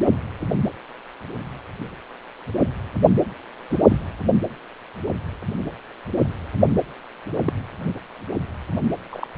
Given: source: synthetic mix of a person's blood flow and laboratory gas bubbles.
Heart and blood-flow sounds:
Doppler ultrasound of blood flow; precordium
3.69-3.78 s: bubbles
3.89-3.98 s: bubbles
7.45-7.53 s: bubbles
9.12-9.28 s: bubbles
From the record:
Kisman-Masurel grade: 122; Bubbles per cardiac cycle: 1 to 2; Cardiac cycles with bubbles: 10 to 50%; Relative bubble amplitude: moderate (0.250 to 0.450); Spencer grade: 2 (many but less than half of the cardiac periods contain bubble signals, singularly or in groups); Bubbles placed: anywhere in the cardiac cycle

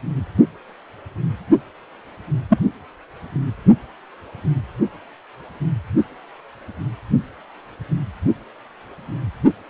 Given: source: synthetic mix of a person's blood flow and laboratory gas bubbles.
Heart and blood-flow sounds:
Doppler ultrasound of blood flow; precordium
2.50-2.58 s: bubbles
From the record:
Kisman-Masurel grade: 113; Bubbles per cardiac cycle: 1 to 2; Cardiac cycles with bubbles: 1 to 10%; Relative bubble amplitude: loud (0.450 to 0.775); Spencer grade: 1 (occasional bubble signal discernible with the cardiac motion signal, with majority of cardiac periods free of bubbles); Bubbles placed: only in the low amplitude regions of the cardiac cycle

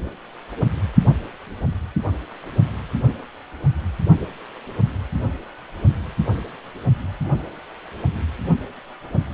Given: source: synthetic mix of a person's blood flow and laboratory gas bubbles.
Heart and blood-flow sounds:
Doppler ultrasound of blood flow; precordium
no bubbles
From the record:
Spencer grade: 0 (complete lack of bubble signals)

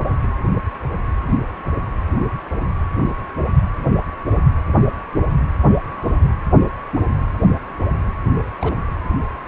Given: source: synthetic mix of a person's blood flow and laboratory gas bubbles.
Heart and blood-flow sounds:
Doppler ultrasound of blood flow; precordium
8.61-8.81 s: bubbles
From the record:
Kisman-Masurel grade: 111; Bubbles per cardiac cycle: 1 to 2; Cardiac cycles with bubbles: 1 to 10%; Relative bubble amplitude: barely perceptible (0.100 to 0.250); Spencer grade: 1 (occasional bubble signal discernible with the cardiac motion signal, with majority of cardiac periods free of bubbles); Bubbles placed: anywhere in the cardiac cycle

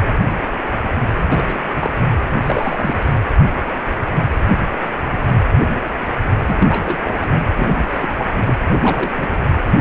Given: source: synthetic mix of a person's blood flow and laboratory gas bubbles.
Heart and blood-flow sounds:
Doppler ultrasound of blood flow; precordium
1.15-1.60 s: bubbles
1.75-1.91 s: bubbles
2.43-3.12 s: bubbles
6.46-6.98 s: bubbles
7.04-7.39 s: bubbles
7.56-7.81 s: bubbles
7.88-8.09 s: bubbles
8.18-8.27 s: bubbles
8.45-8.58 s: bubbles
8.64-9.39 s: bubbles
9.66-9.71 s: bubbles
From the record:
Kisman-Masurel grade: 232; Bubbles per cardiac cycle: several, 3 to 8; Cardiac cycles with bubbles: 50 to 99%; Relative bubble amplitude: moderate (0.250 to 0.450); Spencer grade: 3 (all of the cardiac periods contain showers or single bubble signals, but not dominating or overriding the cardiac motion signals); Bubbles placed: anywhere in the cardiac cycle

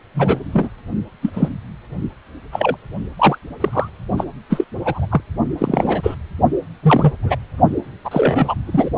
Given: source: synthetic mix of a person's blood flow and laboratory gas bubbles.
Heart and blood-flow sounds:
Doppler ultrasound of blood flow; precordium
0.14-0.40 s: bubbles
0.52-0.69 s: bubbles
1.22-1.30 s: bubbles
1.33-1.49 s: bubbles
2.52-2.77 s: bubbles
3.18-3.38 s: bubbles
3.60-3.90 s: bubbles
4.17-4.24 s: bubbles
4.49-4.64 s: bubbles
4.85-5.06 s: bubbles
5.10-5.21 s: bubbles
5.58-6.15 s: bubbles
6.82-7.12 s: bubbles
7.22-7.36 s: bubbles
8.04-8.54 s: bubbles
8.65-8.89 s: bubbles
From the record:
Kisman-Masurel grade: 243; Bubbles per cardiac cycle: several, 3 to 8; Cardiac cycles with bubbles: 100%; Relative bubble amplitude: loud (0.450 to 0.775); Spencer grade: 3 (all of the cardiac periods contain showers or single bubble signals, but not dominating or overriding the cardiac motion signals); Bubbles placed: only in the low amplitude regions of the cardiac cycle

